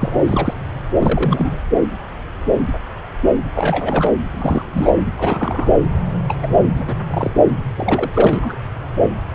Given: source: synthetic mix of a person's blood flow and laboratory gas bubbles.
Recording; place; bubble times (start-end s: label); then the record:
Doppler ultrasound of blood flow; subclavian vein
0.00-0.21 s: bubbles
0.24-0.54 s: bubbles
0.99-1.58 s: bubbles
3.55-4.13 s: bubbles
4.31-5.01 s: bubbles
5.17-5.72 s: bubbles
6.28-6.36 s: bubbles
6.42-6.58 s: bubbles
6.75-6.83 s: bubbles
6.86-6.96 s: bubbles
7.10-7.31 s: bubbles
7.76-8.56 s: bubbles
From the record:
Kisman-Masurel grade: 232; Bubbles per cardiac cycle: several, 3 to 8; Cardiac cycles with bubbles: 50 to 99%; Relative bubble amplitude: moderate (0.250 to 0.450); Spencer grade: 3 (all of the cardiac periods contain showers or single bubble signals, but not dominating or overriding the cardiac motion signals); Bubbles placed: anywhere in the cardiac cycle